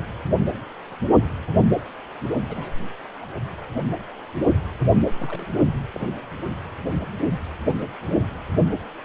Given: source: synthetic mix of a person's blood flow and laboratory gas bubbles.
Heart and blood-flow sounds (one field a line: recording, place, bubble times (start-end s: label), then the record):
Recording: Doppler ultrasound of blood flow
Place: precordium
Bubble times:
2.49-2.71 s: bubbles
3.21-3.25 s: bubbles
5.15-5.57 s: bubbles
5.93-6.07 s: bubbles
From the record:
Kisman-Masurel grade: 221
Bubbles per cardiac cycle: several, 3 to 8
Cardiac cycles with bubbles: 10 to 50%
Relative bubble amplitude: barely perceptible (0.100 to 0.250)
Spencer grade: 2 (many but less than half of the cardiac periods contain bubble signals, singularly or in groups)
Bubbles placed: only in the low amplitude regions of the cardiac cycle